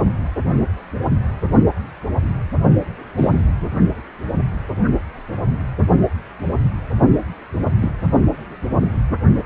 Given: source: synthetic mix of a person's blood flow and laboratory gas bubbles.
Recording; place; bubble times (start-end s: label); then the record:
Doppler ultrasound of blood flow; precordium
3.17-3.45 s: bubbles
7.81-7.91 s: bubbles
From the record:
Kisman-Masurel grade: 122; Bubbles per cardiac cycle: 1 to 2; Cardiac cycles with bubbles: 10 to 50%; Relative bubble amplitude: moderate (0.250 to 0.450); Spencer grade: 2 (many but less than half of the cardiac periods contain bubble signals, singularly or in groups); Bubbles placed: only in the low amplitude regions of the cardiac cycle